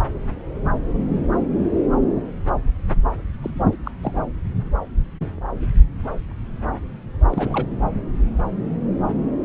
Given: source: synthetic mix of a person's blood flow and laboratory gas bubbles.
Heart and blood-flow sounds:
Doppler ultrasound of blood flow; subclavian vein
3.42-3.50 s: bubbles
3.71-3.76 s: bubbles
3.83-3.91 s: bubbles
4.03-4.22 s: bubbles
7.30-7.66 s: bubbles
From the record:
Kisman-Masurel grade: 211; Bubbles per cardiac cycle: several, 3 to 8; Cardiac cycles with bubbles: 1 to 10%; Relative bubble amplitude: barely perceptible (0.100 to 0.250); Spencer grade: 1 (occasional bubble signal discernible with the cardiac motion signal, with majority of cardiac periods free of bubbles); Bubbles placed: anywhere in the cardiac cycle

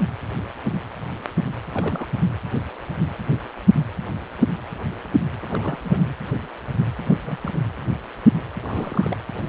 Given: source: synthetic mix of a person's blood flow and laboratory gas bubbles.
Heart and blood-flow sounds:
Doppler ultrasound of blood flow; precordium
1.74-2.08 s: bubbles
5.42-5.78 s: bubbles
5.83-6.09 s: bubbles
7.04-7.13 s: bubbles
7.24-7.37 s: bubbles
7.41-7.60 s: bubbles
8.57-9.17 s: bubbles
From the record:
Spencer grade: 2 (many but less than half of the cardiac periods contain bubble signals, singularly or in groups); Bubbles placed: anywhere in the cardiac cycle

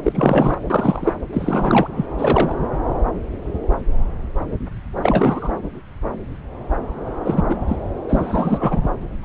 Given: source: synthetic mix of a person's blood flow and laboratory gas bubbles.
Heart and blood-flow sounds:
Doppler ultrasound of blood flow; subclavian vein
0.02-0.58 s: bubbles
0.70-1.13 s: bubbles
1.32-1.88 s: bubbles
1.96-2.06 s: bubbles
2.17-2.55 s: bubbles
5.01-5.53 s: bubbles
7.24-7.43 s: bubbles
7.49-7.56 s: bubbles
7.67-7.76 s: bubbles
8.08-8.82 s: bubbles
9.21-9.25 s: bubbles
From the record:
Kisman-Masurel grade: 233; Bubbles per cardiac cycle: several, 3 to 8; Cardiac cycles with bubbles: 50 to 99%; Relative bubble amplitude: loud (0.450 to 0.775); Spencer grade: 3 (all of the cardiac periods contain showers or single bubble signals, but not dominating or overriding the cardiac motion signals); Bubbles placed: anywhere in the cardiac cycle

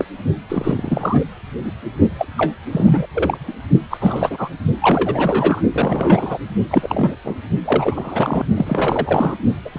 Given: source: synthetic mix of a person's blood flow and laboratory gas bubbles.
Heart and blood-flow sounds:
Doppler ultrasound of blood flow; precordium
0.00-0.05 s: bubbles
0.49-1.24 s: bubbles
1.65-1.71 s: bubbles
2.18-2.27 s: bubbles
2.38-2.54 s: bubbles
2.72-3.06 s: bubbles
3.13-3.53 s: bubbles
3.90-3.97 s: bubbles
4.00-4.49 s: bubbles
4.81-5.62 s: bubbles
5.72-6.38 s: bubbles
6.71-7.16 s: bubbles
7.24-7.36 s: bubbles
7.64-8.44 s: bubbles
8.56-9.35 s: bubbles
9.65-9.70 s: bubbles
9.72-9.79 s: bubbles
From the record:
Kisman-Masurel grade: 342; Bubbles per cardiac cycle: rolling drumbeat, 9 or more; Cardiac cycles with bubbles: 100%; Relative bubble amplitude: moderate (0.250 to 0.450); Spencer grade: 3 (all of the cardiac periods contain showers or single bubble signals, but not dominating or overriding the cardiac motion signals); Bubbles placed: only in the low amplitude regions of the cardiac cycle

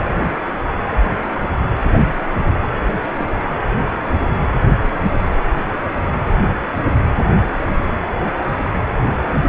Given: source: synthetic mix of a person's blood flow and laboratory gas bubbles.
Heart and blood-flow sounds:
Doppler ultrasound of blood flow; precordium
3.13-3.27 s: bubbles
From the record:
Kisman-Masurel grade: 121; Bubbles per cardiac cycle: 1 to 2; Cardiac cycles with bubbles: 10 to 50%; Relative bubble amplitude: barely perceptible (0.100 to 0.250); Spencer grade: 2 (many but less than half of the cardiac periods contain bubble signals, singularly or in groups); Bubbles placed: anywhere in the cardiac cycle

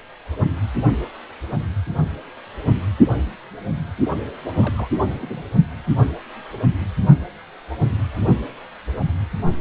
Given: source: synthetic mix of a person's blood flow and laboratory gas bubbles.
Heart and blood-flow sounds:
Doppler ultrasound of blood flow; precordium
4.56-4.90 s: bubbles
4.95-5.46 s: bubbles
From the record:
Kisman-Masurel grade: 211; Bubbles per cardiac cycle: several, 3 to 8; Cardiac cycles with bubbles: 1 to 10%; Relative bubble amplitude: barely perceptible (0.100 to 0.250); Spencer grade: 1 (occasional bubble signal discernible with the cardiac motion signal, with majority of cardiac periods free of bubbles); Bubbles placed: only in the low amplitude regions of the cardiac cycle

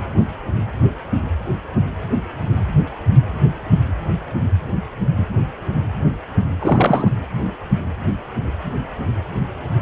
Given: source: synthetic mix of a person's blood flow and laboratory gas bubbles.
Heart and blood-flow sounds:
Doppler ultrasound of blood flow; precordium
6.60-7.08 s: bubbles
From the record:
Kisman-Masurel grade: 213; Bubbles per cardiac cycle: several, 3 to 8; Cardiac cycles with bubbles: 1 to 10%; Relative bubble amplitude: loud (0.450 to 0.775); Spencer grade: 1 (occasional bubble signal discernible with the cardiac motion signal, with majority of cardiac periods free of bubbles); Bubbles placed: anywhere in the cardiac cycle

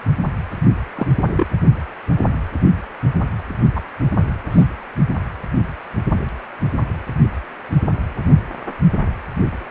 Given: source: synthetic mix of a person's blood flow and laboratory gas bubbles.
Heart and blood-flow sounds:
Doppler ultrasound of blood flow; precordium
0.96-1.06 s: bubbles
1.27-1.47 s: bubbles
3.75-3.80 s: bubbles
4.16-4.23 s: bubbles
4.51-4.65 s: bubbles
From the record:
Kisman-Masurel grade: 222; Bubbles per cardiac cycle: several, 3 to 8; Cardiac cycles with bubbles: 10 to 50%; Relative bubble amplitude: moderate (0.250 to 0.450); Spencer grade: 2 (many but less than half of the cardiac periods contain bubble signals, singularly or in groups); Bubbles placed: only in the low amplitude regions of the cardiac cycle

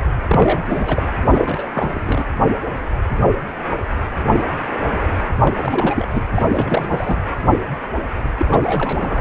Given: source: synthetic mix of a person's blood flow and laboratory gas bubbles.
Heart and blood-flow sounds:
Doppler ultrasound of blood flow; precordium
0.28-0.66 s: bubbles
0.68-1.03 s: bubbles
1.30-1.69 s: bubbles
1.72-2.01 s: bubbles
2.04-2.25 s: bubbles
5.29-5.54 s: bubbles
5.57-6.06 s: bubbles
6.14-6.22 s: bubbles
6.34-6.46 s: bubbles
6.50-7.20 s: bubbles
8.38-9.21 s: bubbles
From the record:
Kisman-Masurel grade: 332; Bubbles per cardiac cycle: rolling drumbeat, 9 or more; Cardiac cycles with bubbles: 50 to 99%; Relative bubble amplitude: moderate (0.250 to 0.450); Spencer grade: 3 (all of the cardiac periods contain showers or single bubble signals, but not dominating or overriding the cardiac motion signals); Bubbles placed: anywhere in the cardiac cycle

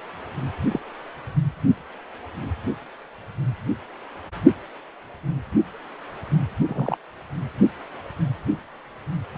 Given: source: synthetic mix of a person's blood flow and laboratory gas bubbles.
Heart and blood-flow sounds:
Doppler ultrasound of blood flow; precordium
0.71-0.80 s: bubbles
6.67-6.98 s: bubbles
From the record:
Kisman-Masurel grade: 122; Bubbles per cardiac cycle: 1 to 2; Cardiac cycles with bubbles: 10 to 50%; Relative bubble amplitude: moderate (0.250 to 0.450); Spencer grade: 2 (many but less than half of the cardiac periods contain bubble signals, singularly or in groups); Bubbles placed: only in the low amplitude regions of the cardiac cycle

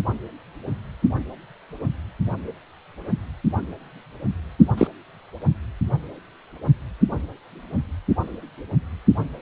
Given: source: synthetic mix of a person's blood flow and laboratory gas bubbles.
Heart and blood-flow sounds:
Doppler ultrasound of blood flow; precordium
4.78-4.88 s: bubbles
From the record:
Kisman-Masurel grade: 113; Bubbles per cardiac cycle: 1 to 2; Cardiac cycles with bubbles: 1 to 10%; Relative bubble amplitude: loud (0.450 to 0.775); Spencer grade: 1 (occasional bubble signal discernible with the cardiac motion signal, with majority of cardiac periods free of bubbles); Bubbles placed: only in the low amplitude regions of the cardiac cycle

